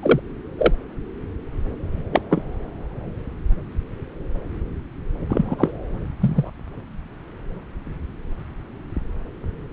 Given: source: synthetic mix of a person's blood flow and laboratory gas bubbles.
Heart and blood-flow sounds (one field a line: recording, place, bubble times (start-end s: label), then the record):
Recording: Doppler ultrasound of blood flow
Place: subclavian vein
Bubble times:
0.02-0.20 s: bubbles
0.59-0.72 s: bubbles
2.12-2.21 s: bubbles
2.29-2.42 s: bubbles
5.29-5.74 s: bubbles
6.21-6.50 s: bubbles
From the record:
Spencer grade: 2 (many but less than half of the cardiac periods contain bubble signals, singularly or in groups)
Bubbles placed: anywhere in the cardiac cycle